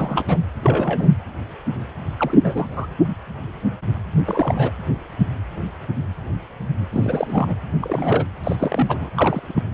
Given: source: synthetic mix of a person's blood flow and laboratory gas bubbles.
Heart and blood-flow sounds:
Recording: Doppler ultrasound of blood flow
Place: precordium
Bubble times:
0.00-0.24 s: bubbles
0.28-0.42 s: bubbles
0.62-1.13 s: bubbles
2.18-2.88 s: bubbles
4.26-4.71 s: bubbles
6.92-7.54 s: bubbles
7.81-8.26 s: bubbles
8.44-9.09 s: bubbles
9.15-9.63 s: bubbles
From the record:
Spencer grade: 3 (all of the cardiac periods contain showers or single bubble signals, but not dominating or overriding the cardiac motion signals)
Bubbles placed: anywhere in the cardiac cycle

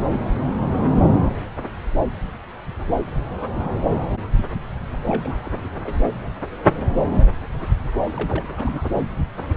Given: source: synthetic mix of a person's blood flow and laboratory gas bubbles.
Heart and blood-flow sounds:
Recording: Doppler ultrasound of blood flow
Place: subclavian vein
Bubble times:
0.11-0.18 s: bubbles
5.06-5.95 s: bubbles
8.04-8.11 s: bubbles
8.16-8.88 s: bubbles
From the record:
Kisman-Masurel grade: 221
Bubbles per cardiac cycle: several, 3 to 8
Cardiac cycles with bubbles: 10 to 50%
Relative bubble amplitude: barely perceptible (0.100 to 0.250)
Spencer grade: 2 (many but less than half of the cardiac periods contain bubble signals, singularly or in groups)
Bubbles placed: anywhere in the cardiac cycle

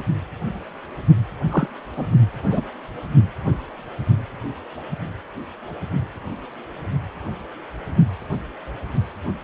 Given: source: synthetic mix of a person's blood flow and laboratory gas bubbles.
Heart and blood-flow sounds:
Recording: Doppler ultrasound of blood flow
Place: precordium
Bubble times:
1.50-1.68 s: bubbles
1.96-2.06 s: bubbles
2.48-2.62 s: bubbles
From the record:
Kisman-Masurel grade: 122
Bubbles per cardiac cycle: 1 to 2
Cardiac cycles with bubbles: 10 to 50%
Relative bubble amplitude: moderate (0.250 to 0.450)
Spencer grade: 2 (many but less than half of the cardiac periods contain bubble signals, singularly or in groups)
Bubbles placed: only in the low amplitude regions of the cardiac cycle

